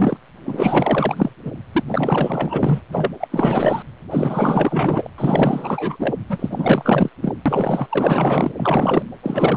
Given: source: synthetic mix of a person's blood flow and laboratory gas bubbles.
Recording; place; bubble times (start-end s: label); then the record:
Doppler ultrasound of blood flow; precordium
0.00-0.17 s: bubbles
0.45-1.32 s: bubbles
1.44-1.52 s: bubbles
1.72-1.83 s: bubbles
1.87-2.81 s: bubbles
2.92-3.10 s: bubbles
3.20-3.82 s: bubbles
4.11-5.10 s: bubbles
5.18-5.96 s: bubbles
5.99-6.15 s: bubbles
6.29-7.10 s: bubbles
7.21-7.34 s: bubbles
7.46-7.87 s: bubbles
7.89-8.52 s: bubbles
8.56-9.03 s: bubbles
9.22-9.57 s: bubbles
From the record:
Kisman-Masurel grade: 444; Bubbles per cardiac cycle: continuous sound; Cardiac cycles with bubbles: 100%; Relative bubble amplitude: maximal (0.775 to 0.999); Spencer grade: 4 (maximum detectable bubble signal sounding continuously throughout systole and diastole of every cardiac period, and overriding the amplitude of the normal cardiac signals); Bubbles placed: anywhere in the cardiac cycle